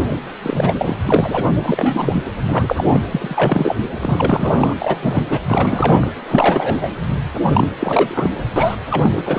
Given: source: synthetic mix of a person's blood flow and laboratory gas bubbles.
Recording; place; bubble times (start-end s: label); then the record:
Doppler ultrasound of blood flow; precordium
0.10-0.16 s: bubbles
0.42-0.98 s: bubbles
1.06-1.44 s: bubbles
1.62-2.23 s: bubbles
2.46-2.84 s: bubbles
2.88-3.01 s: bubbles
3.12-3.77 s: bubbles
4.00-4.75 s: bubbles
4.79-4.97 s: bubbles
5.02-5.25 s: bubbles
5.29-5.40 s: bubbles
5.47-6.12 s: bubbles
6.28-6.90 s: bubbles
7.53-7.68 s: bubbles
7.79-8.30 s: bubbles
8.56-8.76 s: bubbles
8.90-9.10 s: bubbles
9.16-9.23 s: bubbles
9.25-9.38 s: bubbles
From the record:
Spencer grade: 3 (all of the cardiac periods contain showers or single bubble signals, but not dominating or overriding the cardiac motion signals); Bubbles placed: anywhere in the cardiac cycle